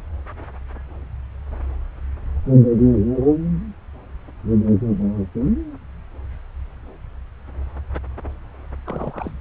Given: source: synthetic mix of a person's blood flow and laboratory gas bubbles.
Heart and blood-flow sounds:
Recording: Doppler ultrasound of blood flow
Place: subclavian vein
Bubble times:
8.85-9.32 s: bubbles
From the record:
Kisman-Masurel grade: 211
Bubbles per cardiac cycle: several, 3 to 8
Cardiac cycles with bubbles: 1 to 10%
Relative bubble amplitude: barely perceptible (0.100 to 0.250)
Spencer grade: 1 (occasional bubble signal discernible with the cardiac motion signal, with majority of cardiac periods free of bubbles)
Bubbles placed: anywhere in the cardiac cycle

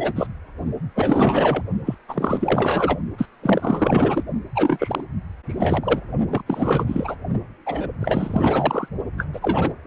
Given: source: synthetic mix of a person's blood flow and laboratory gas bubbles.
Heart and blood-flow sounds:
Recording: Doppler ultrasound of blood flow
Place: precordium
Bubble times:
0.00-0.27 s: bubbles
0.94-1.64 s: bubbles
1.86-1.95 s: bubbles
2.08-2.98 s: bubbles
3.18-3.29 s: bubbles
3.42-4.24 s: bubbles
4.54-5.04 s: bubbles
5.48-6.01 s: bubbles
6.27-6.42 s: bubbles
6.46-7.17 s: bubbles
7.65-7.88 s: bubbles
8.00-8.88 s: bubbles
9.18-9.27 s: bubbles
9.33-9.74 s: bubbles
9.85-9.87 s: bubbles
From the record:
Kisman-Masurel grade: 444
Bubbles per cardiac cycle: continuous sound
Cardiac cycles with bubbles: 100%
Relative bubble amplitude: maximal (0.775 to 0.999)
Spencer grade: 4 (maximum detectable bubble signal sounding continuously throughout systole and diastole of every cardiac period, and overriding the amplitude of the normal cardiac signals)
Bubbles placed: only in the low amplitude regions of the cardiac cycle

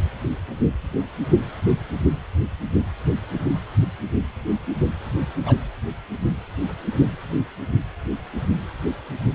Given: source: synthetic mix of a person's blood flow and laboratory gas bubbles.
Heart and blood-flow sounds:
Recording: Doppler ultrasound of blood flow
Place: precordium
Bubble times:
5.46-5.57 s: bubbles
From the record:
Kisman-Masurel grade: 112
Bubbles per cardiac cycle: 1 to 2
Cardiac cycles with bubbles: 1 to 10%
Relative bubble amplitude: moderate (0.250 to 0.450)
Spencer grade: 1 (occasional bubble signal discernible with the cardiac motion signal, with majority of cardiac periods free of bubbles)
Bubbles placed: anywhere in the cardiac cycle

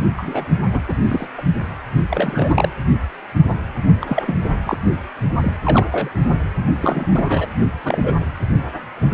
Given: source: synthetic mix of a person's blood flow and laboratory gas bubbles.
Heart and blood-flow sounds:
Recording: Doppler ultrasound of blood flow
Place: precordium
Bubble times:
0.16-0.46 s: bubbles
0.73-0.80 s: bubbles
0.89-0.94 s: bubbles
1.03-1.27 s: bubbles
1.38-1.43 s: bubbles
2.10-2.68 s: bubbles
4.00-4.23 s: bubbles
4.26-4.38 s: bubbles
4.64-4.78 s: bubbles
5.37-5.52 s: bubbles
5.63-5.87 s: bubbles
5.91-6.09 s: bubbles
6.81-7.06 s: bubbles
7.11-7.47 s: bubbles
7.84-8.14 s: bubbles
From the record:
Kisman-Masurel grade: 232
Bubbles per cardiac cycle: several, 3 to 8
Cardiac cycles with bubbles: 50 to 99%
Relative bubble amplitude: moderate (0.250 to 0.450)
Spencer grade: 3 (all of the cardiac periods contain showers or single bubble signals, but not dominating or overriding the cardiac motion signals)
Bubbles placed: only in the low amplitude regions of the cardiac cycle

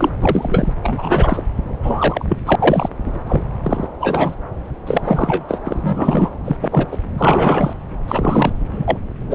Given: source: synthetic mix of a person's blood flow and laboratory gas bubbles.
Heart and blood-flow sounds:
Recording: Doppler ultrasound of blood flow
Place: subclavian vein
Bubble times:
0.00-0.10 s: bubbles
0.20-0.73 s: bubbles
0.83-1.43 s: bubbles
1.83-2.25 s: bubbles
2.29-2.38 s: bubbles
2.45-2.56 s: bubbles
2.58-2.90 s: bubbles
3.06-3.21 s: bubbles
3.27-3.42 s: bubbles
3.62-3.88 s: bubbles
4.00-4.36 s: bubbles
4.87-5.45 s: bubbles
5.48-5.61 s: bubbles
5.65-6.30 s: bubbles
6.45-6.57 s: bubbles
6.61-6.86 s: bubbles
6.91-6.97 s: bubbles
7.17-7.73 s: bubbles
8.08-8.52 s: bubbles
8.71-8.97 s: bubbles
9.30-9.35 s: bubbles
From the record:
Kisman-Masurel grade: 243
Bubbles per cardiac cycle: several, 3 to 8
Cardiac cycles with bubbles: 100%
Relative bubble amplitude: loud (0.450 to 0.775)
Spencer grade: 3 (all of the cardiac periods contain showers or single bubble signals, but not dominating or overriding the cardiac motion signals)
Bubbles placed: anywhere in the cardiac cycle

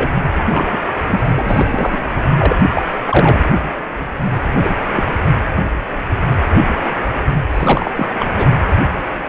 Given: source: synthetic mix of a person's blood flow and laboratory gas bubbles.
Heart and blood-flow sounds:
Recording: Doppler ultrasound of blood flow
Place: precordium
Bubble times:
0.00-0.11 s: bubbles
0.50-0.77 s: bubbles
1.08-1.30 s: bubbles
1.34-1.66 s: bubbles
1.70-1.99 s: bubbles
2.38-2.56 s: bubbles
2.69-2.82 s: bubbles
3.05-3.43 s: bubbles
4.57-4.75 s: bubbles
4.93-5.04 s: bubbles
7.52-7.91 s: bubbles
7.96-8.10 s: bubbles
8.20-8.27 s: bubbles
8.33-8.47 s: bubbles
From the record:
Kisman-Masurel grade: 232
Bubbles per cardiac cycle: several, 3 to 8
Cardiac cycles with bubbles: 50 to 99%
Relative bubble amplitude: moderate (0.250 to 0.450)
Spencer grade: 3 (all of the cardiac periods contain showers or single bubble signals, but not dominating or overriding the cardiac motion signals)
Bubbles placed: anywhere in the cardiac cycle

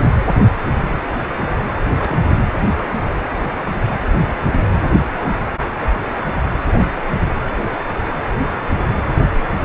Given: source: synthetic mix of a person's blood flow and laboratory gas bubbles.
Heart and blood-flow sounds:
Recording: Doppler ultrasound of blood flow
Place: precordium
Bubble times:
1.98-2.19 s: bubbles
6.78-6.86 s: bubbles
From the record:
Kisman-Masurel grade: 121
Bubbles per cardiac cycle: 1 to 2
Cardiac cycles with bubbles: 10 to 50%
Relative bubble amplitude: barely perceptible (0.100 to 0.250)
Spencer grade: 2 (many but less than half of the cardiac periods contain bubble signals, singularly or in groups)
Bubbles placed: anywhere in the cardiac cycle

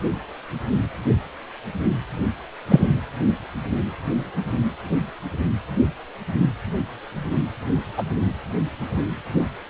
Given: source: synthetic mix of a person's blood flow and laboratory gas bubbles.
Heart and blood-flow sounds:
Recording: Doppler ultrasound of blood flow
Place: precordium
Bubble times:
2.69-2.87 s: bubbles
7.97-8.03 s: bubbles
From the record:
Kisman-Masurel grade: 123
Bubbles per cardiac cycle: 1 to 2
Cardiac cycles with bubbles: 10 to 50%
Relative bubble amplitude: loud (0.450 to 0.775)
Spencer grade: 2 (many but less than half of the cardiac periods contain bubble signals, singularly or in groups)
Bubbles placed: anywhere in the cardiac cycle

